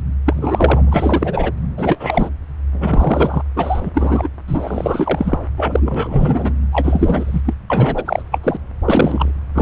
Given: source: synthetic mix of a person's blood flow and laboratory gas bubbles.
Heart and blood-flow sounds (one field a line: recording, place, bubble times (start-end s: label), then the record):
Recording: Doppler ultrasound of blood flow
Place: subclavian vein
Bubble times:
0.26-1.51 s: bubbles
1.77-2.29 s: bubbles
2.72-3.43 s: bubbles
3.56-3.90 s: bubbles
3.94-4.28 s: bubbles
4.47-5.38 s: bubbles
5.57-6.54 s: bubbles
6.72-7.41 s: bubbles
7.45-7.54 s: bubbles
7.70-8.23 s: bubbles
8.32-8.39 s: bubbles
8.43-8.57 s: bubbles
8.86-9.32 s: bubbles
9.55-9.62 s: bubbles
From the record:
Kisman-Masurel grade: 343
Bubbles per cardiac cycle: rolling drumbeat, 9 or more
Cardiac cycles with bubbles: 100%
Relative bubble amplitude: loud (0.450 to 0.775)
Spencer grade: 3 (all of the cardiac periods contain showers or single bubble signals, but not dominating or overriding the cardiac motion signals)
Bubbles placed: anywhere in the cardiac cycle